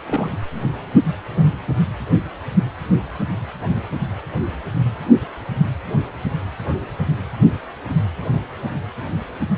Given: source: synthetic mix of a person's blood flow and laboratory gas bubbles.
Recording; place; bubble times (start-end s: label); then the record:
Doppler ultrasound of blood flow; precordium
0.06-0.33 s: bubbles
From the record:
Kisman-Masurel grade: 212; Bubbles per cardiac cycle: several, 3 to 8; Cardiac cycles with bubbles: 1 to 10%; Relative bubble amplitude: moderate (0.250 to 0.450); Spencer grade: 1 (occasional bubble signal discernible with the cardiac motion signal, with majority of cardiac periods free of bubbles); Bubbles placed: anywhere in the cardiac cycle